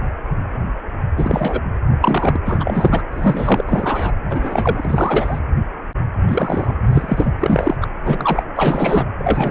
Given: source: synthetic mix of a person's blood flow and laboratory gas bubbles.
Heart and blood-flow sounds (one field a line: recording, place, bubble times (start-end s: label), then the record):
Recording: Doppler ultrasound of blood flow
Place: precordium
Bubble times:
1.17-1.61 s: bubbles
2.02-2.41 s: bubbles
2.46-3.03 s: bubbles
3.12-3.63 s: bubbles
3.66-4.11 s: bubbles
4.29-5.39 s: bubbles
6.26-6.76 s: bubbles
6.86-7.32 s: bubbles
7.40-7.76 s: bubbles
7.81-7.88 s: bubbles
8.04-8.42 s: bubbles
8.55-9.05 s: bubbles
9.18-9.51 s: bubbles
From the record:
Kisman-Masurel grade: 233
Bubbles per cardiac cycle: several, 3 to 8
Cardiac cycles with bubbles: 50 to 99%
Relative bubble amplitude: loud (0.450 to 0.775)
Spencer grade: 3 (all of the cardiac periods contain showers or single bubble signals, but not dominating or overriding the cardiac motion signals)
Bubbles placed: anywhere in the cardiac cycle